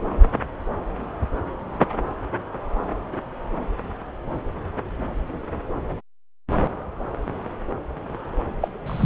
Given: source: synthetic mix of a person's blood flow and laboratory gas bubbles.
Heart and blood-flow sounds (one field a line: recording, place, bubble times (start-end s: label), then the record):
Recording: Doppler ultrasound of blood flow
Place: subclavian vein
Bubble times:
8.61-8.68 s: bubbles
8.86-9.05 s: bubbles
From the record:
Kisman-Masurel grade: 122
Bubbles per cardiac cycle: 1 to 2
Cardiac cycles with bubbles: 10 to 50%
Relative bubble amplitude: moderate (0.250 to 0.450)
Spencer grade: 2 (many but less than half of the cardiac periods contain bubble signals, singularly or in groups)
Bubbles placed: anywhere in the cardiac cycle